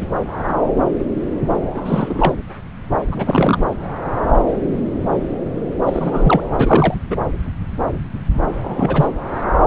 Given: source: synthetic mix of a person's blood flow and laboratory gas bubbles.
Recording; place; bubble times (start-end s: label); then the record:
Doppler ultrasound of blood flow; subclavian vein
1.74-2.35 s: bubbles
3.11-3.58 s: bubbles
5.85-6.41 s: bubbles
6.57-6.94 s: bubbles
7.10-7.17 s: bubbles
8.63-9.07 s: bubbles
From the record:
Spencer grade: 2 (many but less than half of the cardiac periods contain bubble signals, singularly or in groups); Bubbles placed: anywhere in the cardiac cycle